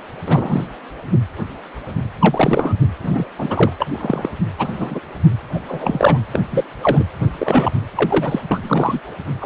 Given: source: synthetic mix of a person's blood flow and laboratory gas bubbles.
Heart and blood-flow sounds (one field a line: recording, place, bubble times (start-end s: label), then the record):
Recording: Doppler ultrasound of blood flow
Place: precordium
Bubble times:
0.26-0.67 s: bubbles
2.19-2.74 s: bubbles
3.00-3.26 s: bubbles
3.38-3.72 s: bubbles
3.80-3.87 s: bubbles
3.90-4.29 s: bubbles
4.57-5.00 s: bubbles
5.54-5.60 s: bubbles
5.68-6.19 s: bubbles
6.33-6.40 s: bubbles
6.50-6.64 s: bubbles
6.82-7.04 s: bubbles
7.38-7.72 s: bubbles
7.95-8.40 s: bubbles
8.51-9.00 s: bubbles
9.41-9.46 s: bubbles
From the record:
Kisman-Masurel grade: 232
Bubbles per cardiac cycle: several, 3 to 8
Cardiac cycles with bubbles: 50 to 99%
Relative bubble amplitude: moderate (0.250 to 0.450)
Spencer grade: 3 (all of the cardiac periods contain showers or single bubble signals, but not dominating or overriding the cardiac motion signals)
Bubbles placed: anywhere in the cardiac cycle